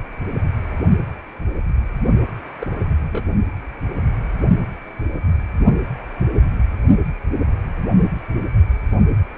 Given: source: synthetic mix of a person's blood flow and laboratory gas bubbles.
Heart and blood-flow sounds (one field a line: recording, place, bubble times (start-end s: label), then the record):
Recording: Doppler ultrasound of blood flow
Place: precordium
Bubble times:
2.59-2.67 s: bubbles
2.98-3.26 s: bubbles
From the record:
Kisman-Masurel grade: 111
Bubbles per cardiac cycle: 1 to 2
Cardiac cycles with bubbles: 1 to 10%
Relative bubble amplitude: barely perceptible (0.100 to 0.250)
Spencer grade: 1 (occasional bubble signal discernible with the cardiac motion signal, with majority of cardiac periods free of bubbles)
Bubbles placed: only in the low amplitude regions of the cardiac cycle